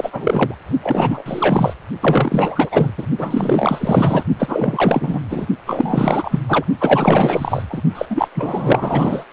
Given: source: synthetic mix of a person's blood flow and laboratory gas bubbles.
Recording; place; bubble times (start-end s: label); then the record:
Doppler ultrasound of blood flow; precordium
0.00-0.54 s: bubbles
0.82-1.23 s: bubbles
1.25-1.74 s: bubbles
2.00-2.91 s: bubbles
2.97-3.06 s: bubbles
3.17-4.24 s: bubbles
4.38-5.21 s: bubbles
5.30-5.47 s: bubbles
5.66-6.40 s: bubbles
6.48-6.64 s: bubbles
6.80-7.62 s: bubbles
7.69-7.81 s: bubbles
7.95-8.06 s: bubbles
8.10-8.28 s: bubbles
8.35-9.24 s: bubbles
From the record:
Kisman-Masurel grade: 444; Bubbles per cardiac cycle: continuous sound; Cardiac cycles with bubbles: 100%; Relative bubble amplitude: maximal (0.775 to 0.999); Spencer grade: 4 (maximum detectable bubble signal sounding continuously throughout systole and diastole of every cardiac period, and overriding the amplitude of the normal cardiac signals); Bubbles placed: only in the low amplitude regions of the cardiac cycle